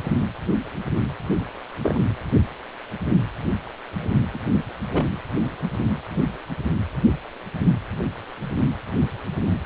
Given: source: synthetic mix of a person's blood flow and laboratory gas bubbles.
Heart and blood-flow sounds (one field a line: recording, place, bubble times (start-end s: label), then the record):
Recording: Doppler ultrasound of blood flow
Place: precordium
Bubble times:
1.81-2.00 s: bubbles
4.33-4.38 s: bubbles
4.92-5.04 s: bubbles
From the record:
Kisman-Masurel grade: 121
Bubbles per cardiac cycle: 1 to 2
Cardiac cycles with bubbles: 10 to 50%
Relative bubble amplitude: barely perceptible (0.100 to 0.250)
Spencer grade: 2 (many but less than half of the cardiac periods contain bubble signals, singularly or in groups)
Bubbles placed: anywhere in the cardiac cycle